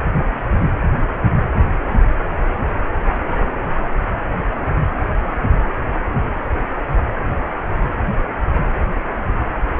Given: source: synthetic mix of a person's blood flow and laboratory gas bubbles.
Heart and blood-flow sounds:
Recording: Doppler ultrasound of blood flow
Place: precordium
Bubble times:
no bubbles
From the record:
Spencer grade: 0 (complete lack of bubble signals)

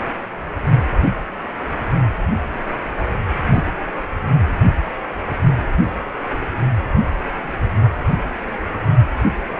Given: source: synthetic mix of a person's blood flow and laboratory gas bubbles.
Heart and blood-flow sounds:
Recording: Doppler ultrasound of blood flow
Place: precordium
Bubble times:
3.50-3.65 s: bubbles
From the record:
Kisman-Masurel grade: 112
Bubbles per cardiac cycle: 1 to 2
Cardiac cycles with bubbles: 1 to 10%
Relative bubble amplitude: moderate (0.250 to 0.450)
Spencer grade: 1 (occasional bubble signal discernible with the cardiac motion signal, with majority of cardiac periods free of bubbles)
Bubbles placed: anywhere in the cardiac cycle

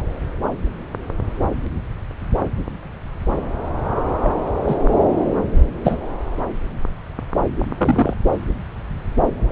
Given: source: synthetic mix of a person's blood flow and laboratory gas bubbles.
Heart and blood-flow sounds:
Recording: Doppler ultrasound of blood flow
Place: subclavian vein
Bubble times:
4.22-4.29 s: bubbles
4.67-4.75 s: bubbles
5.84-5.97 s: bubbles
7.78-8.13 s: bubbles
From the record:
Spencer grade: 2 (many but less than half of the cardiac periods contain bubble signals, singularly or in groups)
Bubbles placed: anywhere in the cardiac cycle

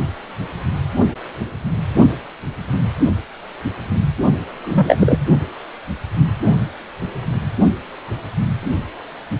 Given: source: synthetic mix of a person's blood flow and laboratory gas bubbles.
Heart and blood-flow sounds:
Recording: Doppler ultrasound of blood flow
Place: precordium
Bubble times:
4.65-5.18 s: bubbles
From the record:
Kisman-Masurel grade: 213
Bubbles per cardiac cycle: several, 3 to 8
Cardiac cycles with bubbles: 1 to 10%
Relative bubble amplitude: loud (0.450 to 0.775)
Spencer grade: 1 (occasional bubble signal discernible with the cardiac motion signal, with majority of cardiac periods free of bubbles)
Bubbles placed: only in the low amplitude regions of the cardiac cycle

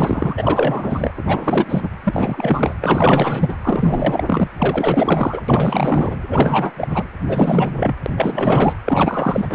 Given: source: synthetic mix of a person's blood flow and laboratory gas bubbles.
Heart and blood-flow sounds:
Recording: Doppler ultrasound of blood flow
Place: precordium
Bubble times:
0.00-0.34 s: bubbles
0.37-1.11 s: bubbles
1.17-1.23 s: bubbles
1.26-1.88 s: bubbles
2.04-2.75 s: bubbles
2.80-3.54 s: bubbles
3.63-4.47 s: bubbles
4.57-5.41 s: bubbles
5.48-6.16 s: bubbles
6.30-6.71 s: bubbles
6.78-7.03 s: bubbles
7.27-7.94 s: bubbles
8.06-8.10 s: bubbles
8.16-8.77 s: bubbles
8.85-9.55 s: bubbles
From the record:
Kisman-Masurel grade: 444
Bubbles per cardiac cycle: continuous sound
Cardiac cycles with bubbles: 100%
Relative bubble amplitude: maximal (0.775 to 0.999)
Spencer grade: 4 (maximum detectable bubble signal sounding continuously throughout systole and diastole of every cardiac period, and overriding the amplitude of the normal cardiac signals)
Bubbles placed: anywhere in the cardiac cycle

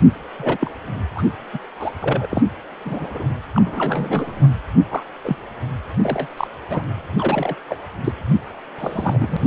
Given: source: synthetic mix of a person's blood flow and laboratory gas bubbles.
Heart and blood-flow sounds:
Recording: Doppler ultrasound of blood flow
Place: precordium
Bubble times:
0.39-0.71 s: bubbles
1.15-1.23 s: bubbles
1.53-1.58 s: bubbles
1.79-1.91 s: bubbles
2.00-2.26 s: bubbles
2.29-2.42 s: bubbles
2.85-3.27 s: bubbles
3.52-3.62 s: bubbles
3.65-4.49 s: bubbles
4.88-5.04 s: bubbles
5.24-5.36 s: bubbles
6.03-6.28 s: bubbles
6.37-6.48 s: bubbles
6.70-6.82 s: bubbles
7.18-7.57 s: bubbles
7.69-7.77 s: bubbles
8.04-8.12 s: bubbles
8.79-9.37 s: bubbles
From the record:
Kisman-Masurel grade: 242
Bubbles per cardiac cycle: several, 3 to 8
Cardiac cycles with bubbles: 100%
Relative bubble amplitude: moderate (0.250 to 0.450)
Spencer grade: 3 (all of the cardiac periods contain showers or single bubble signals, but not dominating or overriding the cardiac motion signals)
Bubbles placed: anywhere in the cardiac cycle

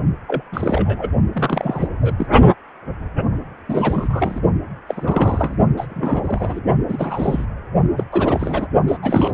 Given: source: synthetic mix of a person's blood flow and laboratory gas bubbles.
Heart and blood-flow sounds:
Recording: Doppler ultrasound of blood flow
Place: precordium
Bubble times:
0.28-0.43 s: bubbles
0.52-1.09 s: bubbles
1.33-1.88 s: bubbles
2.01-2.14 s: bubbles
2.17-2.27 s: bubbles
3.68-4.40 s: bubbles
4.88-5.58 s: bubbles
5.77-5.87 s: bubbles
5.89-6.60 s: bubbles
6.88-7.45 s: bubbles
7.96-8.04 s: bubbles
8.12-8.67 s: bubbles
8.88-8.97 s: bubbles
9.02-9.34 s: bubbles
From the record:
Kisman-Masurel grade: 342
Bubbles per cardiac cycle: rolling drumbeat, 9 or more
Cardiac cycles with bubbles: 100%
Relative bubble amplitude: moderate (0.250 to 0.450)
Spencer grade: 3 (all of the cardiac periods contain showers or single bubble signals, but not dominating or overriding the cardiac motion signals)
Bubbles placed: only in the low amplitude regions of the cardiac cycle

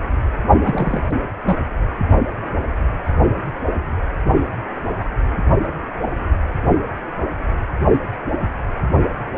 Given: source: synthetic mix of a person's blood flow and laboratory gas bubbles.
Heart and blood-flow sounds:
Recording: Doppler ultrasound of blood flow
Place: precordium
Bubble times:
0.60-1.16 s: bubbles
1.46-1.57 s: bubbles
From the record:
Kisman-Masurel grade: 212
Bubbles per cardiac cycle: several, 3 to 8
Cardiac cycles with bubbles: 1 to 10%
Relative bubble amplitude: moderate (0.250 to 0.450)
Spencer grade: 1 (occasional bubble signal discernible with the cardiac motion signal, with majority of cardiac periods free of bubbles)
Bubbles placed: only in the low amplitude regions of the cardiac cycle

